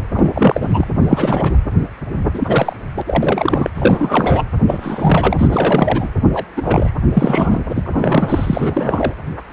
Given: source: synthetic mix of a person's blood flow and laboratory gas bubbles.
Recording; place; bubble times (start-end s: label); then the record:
Doppler ultrasound of blood flow; precordium
0.14-0.87 s: bubbles
1.02-1.57 s: bubbles
2.34-2.76 s: bubbles
2.95-3.01 s: bubbles
3.06-3.70 s: bubbles
3.74-4.44 s: bubbles
4.67-6.09 s: bubbles
6.33-6.45 s: bubbles
6.57-6.92 s: bubbles
7.13-7.61 s: bubbles
7.75-9.14 s: bubbles
From the record:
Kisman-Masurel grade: 343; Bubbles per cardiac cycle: rolling drumbeat, 9 or more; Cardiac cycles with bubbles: 100%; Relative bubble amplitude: loud (0.450 to 0.775); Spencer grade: 3 (all of the cardiac periods contain showers or single bubble signals, but not dominating or overriding the cardiac motion signals); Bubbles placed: anywhere in the cardiac cycle